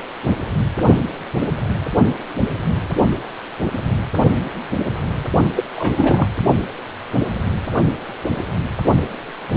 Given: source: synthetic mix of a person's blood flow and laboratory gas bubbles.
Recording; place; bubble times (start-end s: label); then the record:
Doppler ultrasound of blood flow; precordium
5.57-5.63 s: bubbles
5.75-6.30 s: bubbles
From the record:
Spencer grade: 2 (many but less than half of the cardiac periods contain bubble signals, singularly or in groups); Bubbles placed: only in the low amplitude regions of the cardiac cycle